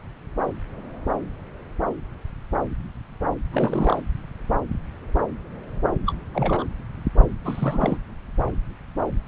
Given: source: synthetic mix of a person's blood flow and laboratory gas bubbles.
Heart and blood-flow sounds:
Doppler ultrasound of blood flow; subclavian vein
3.52-4.00 s: bubbles
6.06-6.14 s: bubbles
6.34-6.65 s: bubbles
7.44-7.97 s: bubbles
From the record:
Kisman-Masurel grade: 221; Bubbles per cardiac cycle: several, 3 to 8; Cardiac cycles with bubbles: 10 to 50%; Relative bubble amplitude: barely perceptible (0.100 to 0.250); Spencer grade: 2 (many but less than half of the cardiac periods contain bubble signals, singularly or in groups); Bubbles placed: anywhere in the cardiac cycle

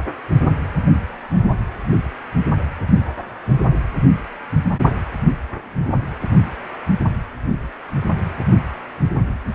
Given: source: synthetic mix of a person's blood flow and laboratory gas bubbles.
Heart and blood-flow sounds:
Doppler ultrasound of blood flow; precordium
0.93-0.98 s: bubbles
From the record:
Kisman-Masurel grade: 111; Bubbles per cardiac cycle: 1 to 2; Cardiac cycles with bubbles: 1 to 10%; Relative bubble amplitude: barely perceptible (0.100 to 0.250); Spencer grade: 1 (occasional bubble signal discernible with the cardiac motion signal, with majority of cardiac periods free of bubbles); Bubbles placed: only in the low amplitude regions of the cardiac cycle

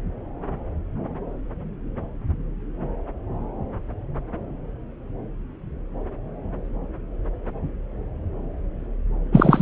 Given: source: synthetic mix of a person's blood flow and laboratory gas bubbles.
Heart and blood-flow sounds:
Doppler ultrasound of blood flow; subclavian vein
9.31-9.62 s: bubbles
From the record:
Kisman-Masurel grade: 213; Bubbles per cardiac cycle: several, 3 to 8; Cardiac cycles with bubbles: 1 to 10%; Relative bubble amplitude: loud (0.450 to 0.775); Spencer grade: 1 (occasional bubble signal discernible with the cardiac motion signal, with majority of cardiac periods free of bubbles); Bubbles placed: anywhere in the cardiac cycle

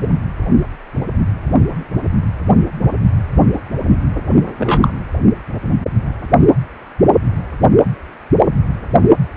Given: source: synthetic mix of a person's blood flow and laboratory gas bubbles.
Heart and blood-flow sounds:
Doppler ultrasound of blood flow; precordium
0.01-0.09 s: bubbles
4.58-4.92 s: bubbles
From the record:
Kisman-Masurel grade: 123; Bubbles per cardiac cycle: 1 to 2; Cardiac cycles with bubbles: 10 to 50%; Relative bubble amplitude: loud (0.450 to 0.775); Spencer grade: 2 (many but less than half of the cardiac periods contain bubble signals, singularly or in groups); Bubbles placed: anywhere in the cardiac cycle

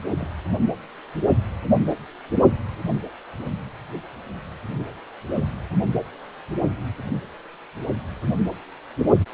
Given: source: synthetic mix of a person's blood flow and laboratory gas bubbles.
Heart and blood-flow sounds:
Doppler ultrasound of blood flow; precordium
0.18-0.29 s: bubbles
From the record:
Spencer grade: 1 (occasional bubble signal discernible with the cardiac motion signal, with majority of cardiac periods free of bubbles); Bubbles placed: only in the low amplitude regions of the cardiac cycle

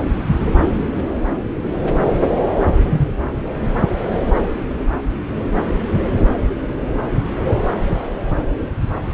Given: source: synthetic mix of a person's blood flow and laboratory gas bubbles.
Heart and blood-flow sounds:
Doppler ultrasound of blood flow; subclavian vein
2.90-3.14 s: bubbles
From the record:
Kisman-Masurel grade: 112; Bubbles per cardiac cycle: 1 to 2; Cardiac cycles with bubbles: 1 to 10%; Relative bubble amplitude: moderate (0.250 to 0.450); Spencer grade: 1 (occasional bubble signal discernible with the cardiac motion signal, with majority of cardiac periods free of bubbles); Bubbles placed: anywhere in the cardiac cycle

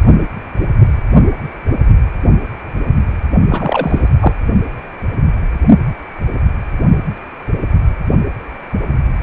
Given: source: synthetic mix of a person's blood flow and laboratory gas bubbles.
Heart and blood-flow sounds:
Doppler ultrasound of blood flow; precordium
3.48-4.09 s: bubbles
4.20-4.33 s: bubbles
From the record:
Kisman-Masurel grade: 213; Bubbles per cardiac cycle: several, 3 to 8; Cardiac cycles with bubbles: 1 to 10%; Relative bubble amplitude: loud (0.450 to 0.775); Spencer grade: 1 (occasional bubble signal discernible with the cardiac motion signal, with majority of cardiac periods free of bubbles); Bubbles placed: only in the low amplitude regions of the cardiac cycle

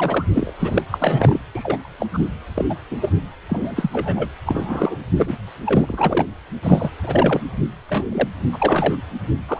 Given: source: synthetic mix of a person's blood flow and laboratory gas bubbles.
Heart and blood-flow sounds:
Doppler ultrasound of blood flow; precordium
0.00-0.26 s: bubbles
0.34-0.53 s: bubbles
0.59-0.82 s: bubbles
0.90-1.39 s: bubbles
1.55-1.92 s: bubbles
1.98-2.06 s: bubbles
2.13-2.23 s: bubbles
2.54-2.65 s: bubbles
2.69-2.75 s: bubbles
2.91-2.97 s: bubbles
3.01-3.10 s: bubbles
3.49-4.29 s: bubbles
4.46-4.97 s: bubbles
5.17-5.29 s: bubbles
5.66-6.25 s: bubbles
6.62-6.91 s: bubbles
7.03-7.41 s: bubbles
7.88-8.29 s: bubbles
8.52-9.01 s: bubbles
9.48-9.60 s: bubbles
From the record:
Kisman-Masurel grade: 243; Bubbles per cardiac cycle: several, 3 to 8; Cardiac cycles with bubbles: 100%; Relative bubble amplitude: loud (0.450 to 0.775); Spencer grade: 3 (all of the cardiac periods contain showers or single bubble signals, but not dominating or overriding the cardiac motion signals); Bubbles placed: anywhere in the cardiac cycle

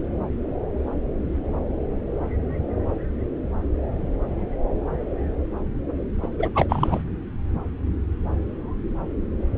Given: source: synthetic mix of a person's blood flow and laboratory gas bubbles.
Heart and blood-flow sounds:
Doppler ultrasound of blood flow; subclavian vein
6.22-6.28 s: bubbles
6.39-6.50 s: bubbles
6.54-6.66 s: bubbles
6.68-7.03 s: bubbles
From the record:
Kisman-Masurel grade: 212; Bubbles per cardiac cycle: several, 3 to 8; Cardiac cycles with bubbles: 1 to 10%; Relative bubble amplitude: moderate (0.250 to 0.450); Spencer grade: 1 (occasional bubble signal discernible with the cardiac motion signal, with majority of cardiac periods free of bubbles); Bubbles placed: anywhere in the cardiac cycle

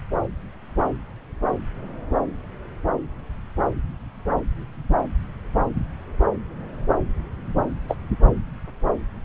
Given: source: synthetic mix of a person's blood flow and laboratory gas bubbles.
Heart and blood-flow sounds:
Doppler ultrasound of blood flow; subclavian vein
7.88-7.97 s: bubbles
From the record:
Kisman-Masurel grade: 122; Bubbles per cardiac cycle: 1 to 2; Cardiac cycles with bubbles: 10 to 50%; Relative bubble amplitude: moderate (0.250 to 0.450); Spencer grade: 2 (many but less than half of the cardiac periods contain bubble signals, singularly or in groups); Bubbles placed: anywhere in the cardiac cycle

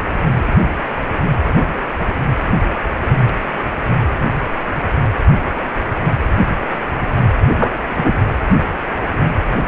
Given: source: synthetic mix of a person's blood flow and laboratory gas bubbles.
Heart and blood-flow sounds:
Doppler ultrasound of blood flow; precordium
7.58-7.74 s: bubbles
7.96-8.13 s: bubbles
From the record:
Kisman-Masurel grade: 113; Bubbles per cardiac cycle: 1 to 2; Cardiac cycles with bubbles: 1 to 10%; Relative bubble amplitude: loud (0.450 to 0.775); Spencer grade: 1 (occasional bubble signal discernible with the cardiac motion signal, with majority of cardiac periods free of bubbles); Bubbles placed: anywhere in the cardiac cycle

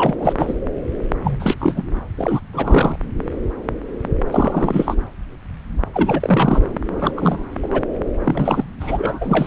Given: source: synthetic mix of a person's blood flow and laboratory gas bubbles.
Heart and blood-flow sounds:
Doppler ultrasound of blood flow; subclavian vein
0.00-0.15 s: bubbles
0.20-0.33 s: bubbles
0.38-0.54 s: bubbles
1.23-1.55 s: bubbles
1.58-1.83 s: bubbles
2.17-2.40 s: bubbles
2.52-2.96 s: bubbles
4.31-4.95 s: bubbles
5.93-6.62 s: bubbles
6.89-7.13 s: bubbles
7.17-7.46 s: bubbles
7.62-7.83 s: bubbles
8.25-8.65 s: bubbles
8.80-9.47 s: bubbles
From the record:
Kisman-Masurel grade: 332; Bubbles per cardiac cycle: rolling drumbeat, 9 or more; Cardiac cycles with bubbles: 50 to 99%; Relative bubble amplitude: moderate (0.250 to 0.450); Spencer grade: 3 (all of the cardiac periods contain showers or single bubble signals, but not dominating or overriding the cardiac motion signals); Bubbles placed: anywhere in the cardiac cycle

